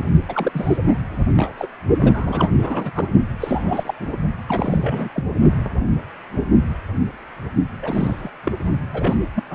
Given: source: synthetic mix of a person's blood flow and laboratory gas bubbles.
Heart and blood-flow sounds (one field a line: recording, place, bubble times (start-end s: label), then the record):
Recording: Doppler ultrasound of blood flow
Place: precordium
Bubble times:
0.00-0.11 s: bubbles
0.28-0.78 s: bubbles
0.87-0.94 s: bubbles
1.37-1.52 s: bubbles
1.58-1.68 s: bubbles
2.00-2.50 s: bubbles
2.60-3.08 s: bubbles
3.40-3.94 s: bubbles
4.00-4.17 s: bubbles
4.47-5.09 s: bubbles
5.14-5.24 s: bubbles
7.82-8.30 s: bubbles
8.46-8.52 s: bubbles
8.91-9.15 s: bubbles
9.35-9.44 s: bubbles
9.50-9.54 s: bubbles
From the record:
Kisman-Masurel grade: 332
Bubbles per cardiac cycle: rolling drumbeat, 9 or more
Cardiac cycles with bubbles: 50 to 99%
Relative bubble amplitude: moderate (0.250 to 0.450)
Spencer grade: 3 (all of the cardiac periods contain showers or single bubble signals, but not dominating or overriding the cardiac motion signals)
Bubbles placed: only in the low amplitude regions of the cardiac cycle